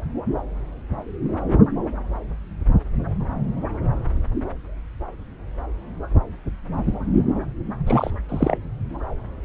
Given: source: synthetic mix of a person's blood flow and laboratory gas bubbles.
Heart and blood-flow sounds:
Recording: Doppler ultrasound of blood flow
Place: subclavian vein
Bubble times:
7.86-8.11 s: bubbles
8.29-8.57 s: bubbles
From the record:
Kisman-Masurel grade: 212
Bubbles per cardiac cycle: several, 3 to 8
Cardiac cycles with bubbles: 1 to 10%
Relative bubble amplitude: moderate (0.250 to 0.450)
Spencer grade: 1 (occasional bubble signal discernible with the cardiac motion signal, with majority of cardiac periods free of bubbles)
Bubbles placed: anywhere in the cardiac cycle

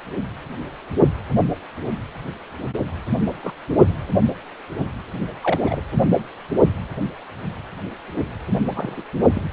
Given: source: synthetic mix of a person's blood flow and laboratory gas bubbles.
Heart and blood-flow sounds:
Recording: Doppler ultrasound of blood flow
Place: precordium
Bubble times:
3.42-3.53 s: bubbles
3.75-3.94 s: bubbles
5.42-5.81 s: bubbles
8.66-9.03 s: bubbles
9.34-9.42 s: bubbles
From the record:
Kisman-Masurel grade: 222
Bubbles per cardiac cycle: several, 3 to 8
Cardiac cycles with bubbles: 10 to 50%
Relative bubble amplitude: moderate (0.250 to 0.450)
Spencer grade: 2 (many but less than half of the cardiac periods contain bubble signals, singularly or in groups)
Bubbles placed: anywhere in the cardiac cycle

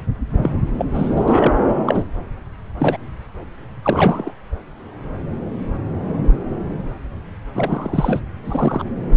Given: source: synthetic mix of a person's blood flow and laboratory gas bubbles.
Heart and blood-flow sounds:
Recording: Doppler ultrasound of blood flow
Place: subclavian vein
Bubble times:
0.43-0.49 s: bubbles
0.78-0.91 s: bubbles
0.94-1.55 s: bubbles
1.86-2.03 s: bubbles
2.79-2.97 s: bubbles
3.83-4.33 s: bubbles
7.53-8.20 s: bubbles
8.44-8.84 s: bubbles
From the record:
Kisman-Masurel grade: 222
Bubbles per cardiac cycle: several, 3 to 8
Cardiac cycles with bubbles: 10 to 50%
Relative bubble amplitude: moderate (0.250 to 0.450)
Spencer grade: 2 (many but less than half of the cardiac periods contain bubble signals, singularly or in groups)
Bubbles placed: anywhere in the cardiac cycle

